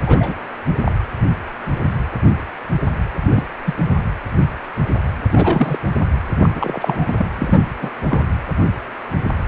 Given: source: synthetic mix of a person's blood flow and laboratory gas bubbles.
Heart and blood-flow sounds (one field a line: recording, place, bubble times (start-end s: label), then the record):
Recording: Doppler ultrasound of blood flow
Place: precordium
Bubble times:
0.06-0.35 s: bubbles
0.84-0.92 s: bubbles
3.31-3.44 s: bubbles
3.65-3.74 s: bubbles
5.32-5.79 s: bubbles
6.42-7.26 s: bubbles
7.38-7.62 s: bubbles
7.81-7.91 s: bubbles
8.08-8.22 s: bubbles
From the record:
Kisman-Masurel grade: 232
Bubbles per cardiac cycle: several, 3 to 8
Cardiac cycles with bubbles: 50 to 99%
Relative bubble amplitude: moderate (0.250 to 0.450)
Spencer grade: 3 (all of the cardiac periods contain showers or single bubble signals, but not dominating or overriding the cardiac motion signals)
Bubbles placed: anywhere in the cardiac cycle